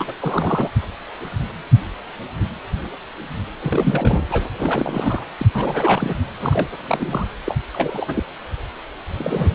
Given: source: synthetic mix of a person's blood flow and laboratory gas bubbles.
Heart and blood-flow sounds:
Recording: Doppler ultrasound of blood flow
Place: precordium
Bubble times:
0.00-0.13 s: bubbles
0.20-0.70 s: bubbles
3.59-4.25 s: bubbles
4.31-4.44 s: bubbles
4.58-5.24 s: bubbles
5.38-5.46 s: bubbles
5.54-6.16 s: bubbles
6.40-6.68 s: bubbles
6.73-7.27 s: bubbles
7.45-7.58 s: bubbles
7.73-8.23 s: bubbles
9.12-9.55 s: bubbles
From the record:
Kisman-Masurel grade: 332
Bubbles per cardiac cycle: rolling drumbeat, 9 or more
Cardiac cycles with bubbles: 50 to 99%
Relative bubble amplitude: moderate (0.250 to 0.450)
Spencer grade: 3 (all of the cardiac periods contain showers or single bubble signals, but not dominating or overriding the cardiac motion signals)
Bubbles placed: anywhere in the cardiac cycle

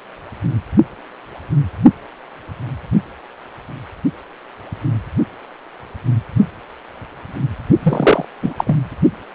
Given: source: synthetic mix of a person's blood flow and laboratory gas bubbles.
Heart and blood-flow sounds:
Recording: Doppler ultrasound of blood flow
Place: precordium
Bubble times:
7.83-8.25 s: bubbles
8.42-8.54 s: bubbles
8.57-8.75 s: bubbles
From the record:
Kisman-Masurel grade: 213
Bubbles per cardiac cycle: several, 3 to 8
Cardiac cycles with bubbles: 1 to 10%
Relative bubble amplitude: loud (0.450 to 0.775)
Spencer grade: 1 (occasional bubble signal discernible with the cardiac motion signal, with majority of cardiac periods free of bubbles)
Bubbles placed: only in the low amplitude regions of the cardiac cycle

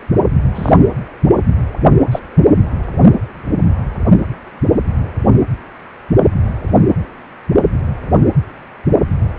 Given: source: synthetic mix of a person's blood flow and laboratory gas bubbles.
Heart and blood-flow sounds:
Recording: Doppler ultrasound of blood flow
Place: precordium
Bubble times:
0.55-0.72 s: bubbles
2.12-2.19 s: bubbles
From the record:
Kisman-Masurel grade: 123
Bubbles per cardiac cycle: 1 to 2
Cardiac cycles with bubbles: 10 to 50%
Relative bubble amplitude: loud (0.450 to 0.775)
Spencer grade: 2 (many but less than half of the cardiac periods contain bubble signals, singularly or in groups)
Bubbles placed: only in the low amplitude regions of the cardiac cycle

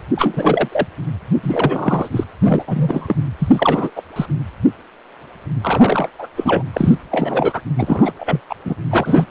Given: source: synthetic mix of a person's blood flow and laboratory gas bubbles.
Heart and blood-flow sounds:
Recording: Doppler ultrasound of blood flow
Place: precordium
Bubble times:
0.15-0.69 s: bubbles
0.71-0.87 s: bubbles
1.43-2.09 s: bubbles
2.12-2.24 s: bubbles
2.42-2.64 s: bubbles
2.67-3.16 s: bubbles
3.39-3.92 s: bubbles
3.96-4.02 s: bubbles
4.16-4.26 s: bubbles
5.61-6.09 s: bubbles
6.18-6.28 s: bubbles
6.36-6.63 s: bubbles
6.72-6.95 s: bubbles
7.10-7.61 s: bubbles
7.78-8.12 s: bubbles
8.18-8.42 s: bubbles
8.49-8.55 s: bubbles
8.64-8.75 s: bubbles
8.89-9.26 s: bubbles
From the record:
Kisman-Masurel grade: 333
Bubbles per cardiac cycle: rolling drumbeat, 9 or more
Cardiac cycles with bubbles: 50 to 99%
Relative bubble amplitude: loud (0.450 to 0.775)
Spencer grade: 3 (all of the cardiac periods contain showers or single bubble signals, but not dominating or overriding the cardiac motion signals)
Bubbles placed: anywhere in the cardiac cycle

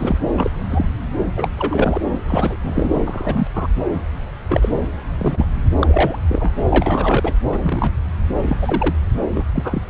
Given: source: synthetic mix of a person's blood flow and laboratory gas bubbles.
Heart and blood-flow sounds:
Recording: Doppler ultrasound of blood flow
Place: subclavian vein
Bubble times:
0.00-0.18 s: bubbles
0.35-0.51 s: bubbles
0.70-0.85 s: bubbles
1.36-1.48 s: bubbles
1.58-2.02 s: bubbles
2.27-2.57 s: bubbles
2.62-3.00 s: bubbles
3.05-3.47 s: bubbles
3.56-3.67 s: bubbles
4.49-4.69 s: bubbles
5.19-5.45 s: bubbles
5.81-6.19 s: bubbles
6.29-6.52 s: bubbles
6.69-7.33 s: bubbles
7.52-7.91 s: bubbles
8.42-8.56 s: bubbles
8.61-8.96 s: bubbles
9.34-9.44 s: bubbles
9.54-9.82 s: bubbles
From the record:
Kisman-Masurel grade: 243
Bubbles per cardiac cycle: several, 3 to 8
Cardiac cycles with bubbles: 100%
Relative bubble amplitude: loud (0.450 to 0.775)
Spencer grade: 3 (all of the cardiac periods contain showers or single bubble signals, but not dominating or overriding the cardiac motion signals)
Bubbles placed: anywhere in the cardiac cycle

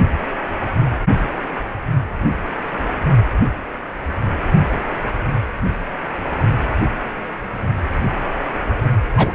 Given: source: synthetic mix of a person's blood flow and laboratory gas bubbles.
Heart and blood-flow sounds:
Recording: Doppler ultrasound of blood flow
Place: precordium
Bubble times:
9.16-9.34 s: bubbles
From the record:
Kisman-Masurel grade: 213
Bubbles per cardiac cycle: several, 3 to 8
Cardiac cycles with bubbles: 1 to 10%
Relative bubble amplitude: loud (0.450 to 0.775)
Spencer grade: 1 (occasional bubble signal discernible with the cardiac motion signal, with majority of cardiac periods free of bubbles)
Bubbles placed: only in the low amplitude regions of the cardiac cycle

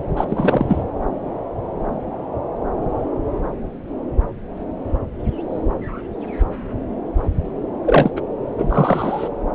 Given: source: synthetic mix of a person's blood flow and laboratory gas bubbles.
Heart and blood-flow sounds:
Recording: Doppler ultrasound of blood flow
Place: subclavian vein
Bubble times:
0.17-0.25 s: bubbles
0.29-0.83 s: bubbles
7.86-8.11 s: bubbles
8.16-8.21 s: bubbles
8.58-9.29 s: bubbles
From the record:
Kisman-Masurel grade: 223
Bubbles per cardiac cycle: several, 3 to 8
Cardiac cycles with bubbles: 10 to 50%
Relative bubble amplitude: loud (0.450 to 0.775)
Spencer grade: 2 (many but less than half of the cardiac periods contain bubble signals, singularly or in groups)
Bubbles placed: anywhere in the cardiac cycle

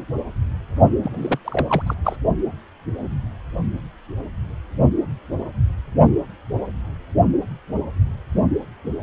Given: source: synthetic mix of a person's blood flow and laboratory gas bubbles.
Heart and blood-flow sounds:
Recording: Doppler ultrasound of blood flow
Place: precordium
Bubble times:
1.03-1.39 s: bubbles
1.44-1.83 s: bubbles
1.87-1.94 s: bubbles
2.04-2.16 s: bubbles
From the record:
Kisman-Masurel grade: 212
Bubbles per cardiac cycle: several, 3 to 8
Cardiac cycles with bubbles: 1 to 10%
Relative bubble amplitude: moderate (0.250 to 0.450)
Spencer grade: 1 (occasional bubble signal discernible with the cardiac motion signal, with majority of cardiac periods free of bubbles)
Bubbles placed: only in the low amplitude regions of the cardiac cycle

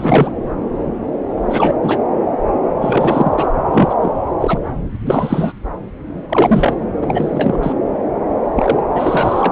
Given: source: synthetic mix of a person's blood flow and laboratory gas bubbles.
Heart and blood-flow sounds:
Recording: Doppler ultrasound of blood flow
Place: subclavian vein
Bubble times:
0.00-0.31 s: bubbles
1.46-1.75 s: bubbles
1.83-1.99 s: bubbles
2.81-3.48 s: bubbles
3.73-3.94 s: bubbles
4.01-4.13 s: bubbles
4.40-4.58 s: bubbles
5.04-5.53 s: bubbles
6.29-6.75 s: bubbles
7.02-7.73 s: bubbles
8.55-8.81 s: bubbles
8.95-9.51 s: bubbles
From the record:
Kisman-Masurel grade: 333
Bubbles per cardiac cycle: rolling drumbeat, 9 or more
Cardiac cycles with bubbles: 50 to 99%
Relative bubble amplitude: loud (0.450 to 0.775)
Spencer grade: 3 (all of the cardiac periods contain showers or single bubble signals, but not dominating or overriding the cardiac motion signals)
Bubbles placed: anywhere in the cardiac cycle

